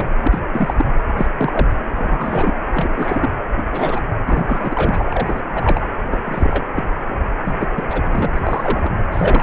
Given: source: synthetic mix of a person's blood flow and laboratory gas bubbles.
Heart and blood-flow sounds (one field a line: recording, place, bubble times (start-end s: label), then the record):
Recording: Doppler ultrasound of blood flow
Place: precordium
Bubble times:
0.00-0.06 s: bubbles
0.23-0.40 s: bubbles
0.52-0.74 s: bubbles
0.78-0.85 s: bubbles
1.17-1.26 s: bubbles
1.38-1.68 s: bubbles
1.96-2.52 s: bubbles
2.74-3.29 s: bubbles
3.56-3.67 s: bubbles
3.71-4.00 s: bubbles
4.26-5.06 s: bubbles
5.10-5.41 s: bubbles
5.54-5.83 s: bubbles
6.10-6.17 s: bubbles
6.24-6.66 s: bubbles
6.73-6.89 s: bubbles
7.45-7.68 s: bubbles
7.75-7.83 s: bubbles
7.89-8.02 s: bubbles
8.12-8.30 s: bubbles
8.36-8.40 s: bubbles
8.43-8.92 s: bubbles
9.12-9.42 s: bubbles
From the record:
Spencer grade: 3 (all of the cardiac periods contain showers or single bubble signals, but not dominating or overriding the cardiac motion signals)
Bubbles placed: anywhere in the cardiac cycle